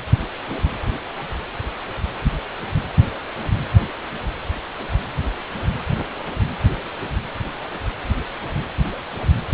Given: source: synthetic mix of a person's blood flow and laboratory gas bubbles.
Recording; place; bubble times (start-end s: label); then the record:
Doppler ultrasound of blood flow; precordium
no bubbles
From the record:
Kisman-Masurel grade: 000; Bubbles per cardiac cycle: 0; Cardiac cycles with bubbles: 0%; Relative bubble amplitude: no bubbles discernible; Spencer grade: 0 (complete lack of bubble signals)